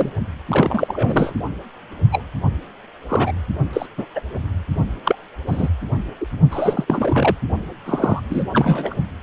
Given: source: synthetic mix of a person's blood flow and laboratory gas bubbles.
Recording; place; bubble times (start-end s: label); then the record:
Doppler ultrasound of blood flow; precordium
0.00-0.10 s: bubbles
0.48-1.33 s: bubbles
2.12-2.23 s: bubbles
3.08-3.32 s: bubbles
3.73-3.86 s: bubbles
3.98-4.06 s: bubbles
4.15-4.21 s: bubbles
5.04-5.16 s: bubbles
5.47-5.69 s: bubbles
6.21-6.26 s: bubbles
6.50-6.85 s: bubbles
6.87-7.36 s: bubbles
7.86-8.20 s: bubbles
8.29-8.44 s: bubbles
8.53-8.95 s: bubbles
From the record:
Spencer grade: 3 (all of the cardiac periods contain showers or single bubble signals, but not dominating or overriding the cardiac motion signals); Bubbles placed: only in the low amplitude regions of the cardiac cycle